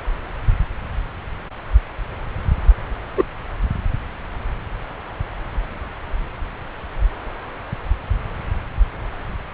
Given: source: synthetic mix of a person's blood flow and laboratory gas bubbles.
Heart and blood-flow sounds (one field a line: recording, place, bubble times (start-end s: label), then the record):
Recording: Doppler ultrasound of blood flow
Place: subclavian vein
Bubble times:
3.16-3.25 s: bubbles
From the record:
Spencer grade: 1 (occasional bubble signal discernible with the cardiac motion signal, with majority of cardiac periods free of bubbles)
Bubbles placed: anywhere in the cardiac cycle